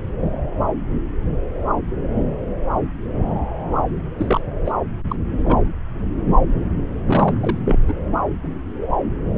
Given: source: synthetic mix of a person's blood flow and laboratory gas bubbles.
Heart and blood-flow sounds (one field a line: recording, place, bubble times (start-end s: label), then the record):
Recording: Doppler ultrasound of blood flow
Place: subclavian vein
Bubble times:
4.18-4.41 s: bubbles
4.66-4.72 s: bubbles
5.08-5.16 s: bubbles
5.44-5.58 s: bubbles
7.05-7.38 s: bubbles
7.41-7.58 s: bubbles
7.65-7.78 s: bubbles
7.88-7.94 s: bubbles
From the record:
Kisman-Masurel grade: 222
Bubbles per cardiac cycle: several, 3 to 8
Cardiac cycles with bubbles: 10 to 50%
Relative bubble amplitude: moderate (0.250 to 0.450)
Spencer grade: 2 (many but less than half of the cardiac periods contain bubble signals, singularly or in groups)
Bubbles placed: anywhere in the cardiac cycle